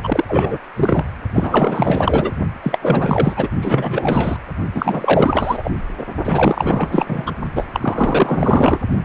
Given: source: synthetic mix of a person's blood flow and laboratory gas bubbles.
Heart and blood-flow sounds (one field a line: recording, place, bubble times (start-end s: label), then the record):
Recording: Doppler ultrasound of blood flow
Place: precordium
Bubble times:
0.03-0.24 s: bubbles
0.28-0.60 s: bubbles
0.76-1.05 s: bubbles
1.33-2.39 s: bubbles
2.62-2.79 s: bubbles
2.81-3.48 s: bubbles
3.61-4.38 s: bubbles
4.74-5.71 s: bubbles
5.97-6.03 s: bubbles
6.24-7.33 s: bubbles
7.55-7.66 s: bubbles
7.73-8.79 s: bubbles
From the record:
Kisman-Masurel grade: 444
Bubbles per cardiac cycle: continuous sound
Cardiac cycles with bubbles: 100%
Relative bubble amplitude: maximal (0.775 to 0.999)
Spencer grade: 4 (maximum detectable bubble signal sounding continuously throughout systole and diastole of every cardiac period, and overriding the amplitude of the normal cardiac signals)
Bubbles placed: only in the low amplitude regions of the cardiac cycle